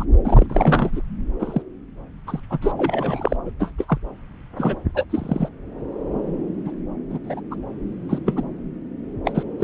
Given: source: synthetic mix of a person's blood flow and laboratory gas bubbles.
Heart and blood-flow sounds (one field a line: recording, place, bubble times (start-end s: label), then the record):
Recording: Doppler ultrasound of blood flow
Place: subclavian vein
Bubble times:
0.00-0.04 s: bubbles
0.24-0.47 s: bubbles
0.49-1.01 s: bubbles
1.39-1.62 s: bubbles
2.27-2.40 s: bubbles
2.50-2.58 s: bubbles
2.62-2.72 s: bubbles
2.77-3.37 s: bubbles
3.46-3.51 s: bubbles
3.60-3.71 s: bubbles
3.78-3.99 s: bubbles
4.57-4.75 s: bubbles
4.94-5.05 s: bubbles
5.09-5.49 s: bubbles
6.65-6.71 s: bubbles
7.09-7.19 s: bubbles
7.24-7.41 s: bubbles
7.50-7.55 s: bubbles
8.09-8.19 s: bubbles
8.26-8.43 s: bubbles
9.25-9.43 s: bubbles
9.60-9.64 s: bubbles
From the record:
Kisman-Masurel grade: 232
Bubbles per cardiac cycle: several, 3 to 8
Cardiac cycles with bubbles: 50 to 99%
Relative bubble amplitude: moderate (0.250 to 0.450)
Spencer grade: 3 (all of the cardiac periods contain showers or single bubble signals, but not dominating or overriding the cardiac motion signals)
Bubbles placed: anywhere in the cardiac cycle